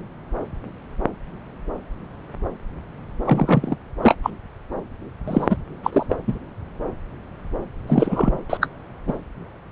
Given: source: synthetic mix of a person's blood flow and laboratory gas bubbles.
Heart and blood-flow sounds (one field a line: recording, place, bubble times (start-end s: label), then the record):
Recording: Doppler ultrasound of blood flow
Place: subclavian vein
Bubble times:
3.25-3.77 s: bubbles
4.02-4.15 s: bubbles
4.22-4.30 s: bubbles
5.28-5.57 s: bubbles
5.83-6.07 s: bubbles
6.09-6.17 s: bubbles
6.27-6.38 s: bubbles
7.88-8.37 s: bubbles
8.50-8.57 s: bubbles
8.61-8.67 s: bubbles
9.08-9.12 s: bubbles
From the record:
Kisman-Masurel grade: 223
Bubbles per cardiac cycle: several, 3 to 8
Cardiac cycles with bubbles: 10 to 50%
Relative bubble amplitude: loud (0.450 to 0.775)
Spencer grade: 2 (many but less than half of the cardiac periods contain bubble signals, singularly or in groups)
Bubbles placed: anywhere in the cardiac cycle